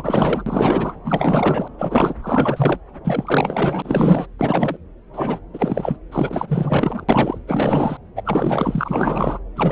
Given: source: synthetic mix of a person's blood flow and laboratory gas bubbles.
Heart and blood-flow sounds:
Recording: Doppler ultrasound of blood flow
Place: subclavian vein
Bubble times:
0.00-0.93 s: bubbles
1.05-1.68 s: bubbles
1.74-1.76 s: bubbles
1.78-2.15 s: bubbles
2.22-2.78 s: bubbles
3.04-4.26 s: bubbles
4.38-4.77 s: bubbles
5.12-5.39 s: bubbles
5.53-5.96 s: bubbles
6.11-7.05 s: bubbles
7.08-7.38 s: bubbles
7.47-7.97 s: bubbles
8.15-9.39 s: bubbles
9.55-9.72 s: bubbles
From the record:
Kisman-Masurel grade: 444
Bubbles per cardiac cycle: continuous sound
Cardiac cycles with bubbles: 100%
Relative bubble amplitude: maximal (0.775 to 0.999)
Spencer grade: 4 (maximum detectable bubble signal sounding continuously throughout systole and diastole of every cardiac period, and overriding the amplitude of the normal cardiac signals)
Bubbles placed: anywhere in the cardiac cycle

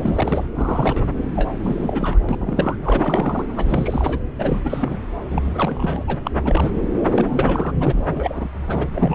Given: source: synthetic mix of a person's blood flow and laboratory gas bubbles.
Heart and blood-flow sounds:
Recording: Doppler ultrasound of blood flow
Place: subclavian vein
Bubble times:
0.02-0.47 s: bubbles
0.54-1.11 s: bubbles
1.34-1.52 s: bubbles
1.64-2.19 s: bubbles
2.28-2.37 s: bubbles
2.40-2.76 s: bubbles
2.82-3.44 s: bubbles
3.56-4.18 s: bubbles
4.39-4.61 s: bubbles
4.65-4.99 s: bubbles
5.30-6.04 s: bubbles
6.07-6.18 s: bubbles
6.25-6.31 s: bubbles
6.45-6.89 s: bubbles
7.12-7.72 s: bubbles
7.80-8.48 s: bubbles
8.67-9.15 s: bubbles
From the record:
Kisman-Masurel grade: 342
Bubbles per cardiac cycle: rolling drumbeat, 9 or more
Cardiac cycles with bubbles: 100%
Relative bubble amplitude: moderate (0.250 to 0.450)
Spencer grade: 3 (all of the cardiac periods contain showers or single bubble signals, but not dominating or overriding the cardiac motion signals)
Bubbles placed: anywhere in the cardiac cycle

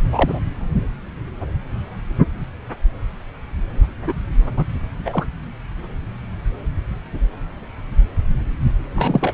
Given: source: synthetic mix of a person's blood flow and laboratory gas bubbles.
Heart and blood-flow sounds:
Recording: Doppler ultrasound of blood flow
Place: subclavian vein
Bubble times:
0.12-0.40 s: bubbles
4.04-4.12 s: bubbles
4.56-4.64 s: bubbles
5.04-5.25 s: bubbles
8.95-9.34 s: bubbles
From the record:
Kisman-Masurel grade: 222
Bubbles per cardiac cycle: several, 3 to 8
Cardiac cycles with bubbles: 10 to 50%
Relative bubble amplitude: moderate (0.250 to 0.450)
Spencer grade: 2 (many but less than half of the cardiac periods contain bubble signals, singularly or in groups)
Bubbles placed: anywhere in the cardiac cycle

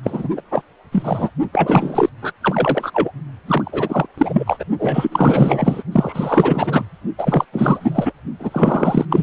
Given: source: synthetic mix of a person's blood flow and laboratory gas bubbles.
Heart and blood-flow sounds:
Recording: Doppler ultrasound of blood flow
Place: precordium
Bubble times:
0.03-0.28 s: bubbles
0.37-0.41 s: bubbles
0.51-0.63 s: bubbles
0.92-1.30 s: bubbles
1.52-2.09 s: bubbles
2.22-2.32 s: bubbles
2.41-3.11 s: bubbles
3.46-4.07 s: bubbles
4.17-4.64 s: bubbles
4.79-5.83 s: bubbles
5.92-6.85 s: bubbles
7.18-7.45 s: bubbles
7.52-8.12 s: bubbles
8.39-9.05 s: bubbles
9.10-9.23 s: bubbles
From the record:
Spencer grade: 4 (maximum detectable bubble signal sounding continuously throughout systole and diastole of every cardiac period, and overriding the amplitude of the normal cardiac signals)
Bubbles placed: only in the low amplitude regions of the cardiac cycle

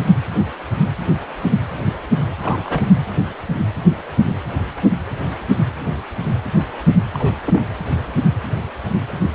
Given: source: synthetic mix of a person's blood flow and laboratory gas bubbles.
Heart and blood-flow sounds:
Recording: Doppler ultrasound of blood flow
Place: precordium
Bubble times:
2.42-2.84 s: bubbles
7.14-7.33 s: bubbles
7.46-7.62 s: bubbles
From the record:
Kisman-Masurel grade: 222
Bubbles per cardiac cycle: several, 3 to 8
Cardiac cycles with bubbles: 10 to 50%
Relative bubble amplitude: moderate (0.250 to 0.450)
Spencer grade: 2 (many but less than half of the cardiac periods contain bubble signals, singularly or in groups)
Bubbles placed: anywhere in the cardiac cycle

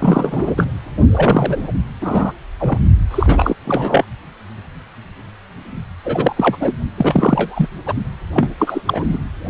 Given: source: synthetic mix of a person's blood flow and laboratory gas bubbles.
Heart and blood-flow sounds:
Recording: Doppler ultrasound of blood flow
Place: precordium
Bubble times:
0.00-0.72 s: bubbles
1.11-1.72 s: bubbles
2.01-2.32 s: bubbles
2.59-2.79 s: bubbles
3.10-3.54 s: bubbles
3.65-4.04 s: bubbles
6.04-6.58 s: bubbles
6.60-6.73 s: bubbles
6.96-7.67 s: bubbles
7.86-7.93 s: bubbles
8.34-8.52 s: bubbles
8.58-8.81 s: bubbles
8.85-9.06 s: bubbles
9.09-9.18 s: bubbles
From the record:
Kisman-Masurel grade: 333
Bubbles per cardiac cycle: rolling drumbeat, 9 or more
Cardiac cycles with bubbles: 50 to 99%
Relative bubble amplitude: loud (0.450 to 0.775)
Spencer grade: 3 (all of the cardiac periods contain showers or single bubble signals, but not dominating or overriding the cardiac motion signals)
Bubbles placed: only in the low amplitude regions of the cardiac cycle

